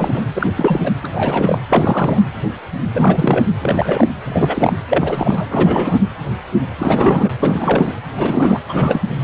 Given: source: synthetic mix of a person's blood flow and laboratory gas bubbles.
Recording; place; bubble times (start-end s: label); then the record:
Doppler ultrasound of blood flow; precordium
0.00-0.21 s: bubbles
0.34-0.50 s: bubbles
0.55-0.91 s: bubbles
1.03-1.08 s: bubbles
1.12-1.58 s: bubbles
1.71-2.19 s: bubbles
2.94-3.46 s: bubbles
3.60-4.07 s: bubbles
4.26-4.73 s: bubbles
4.90-5.46 s: bubbles
5.49-5.99 s: bubbles
6.78-7.34 s: bubbles
7.40-7.93 s: bubbles
8.17-8.59 s: bubbles
8.69-9.01 s: bubbles
From the record:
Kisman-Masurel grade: 333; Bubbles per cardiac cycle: rolling drumbeat, 9 or more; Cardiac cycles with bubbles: 50 to 99%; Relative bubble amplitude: loud (0.450 to 0.775); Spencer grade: 3 (all of the cardiac periods contain showers or single bubble signals, but not dominating or overriding the cardiac motion signals); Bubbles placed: anywhere in the cardiac cycle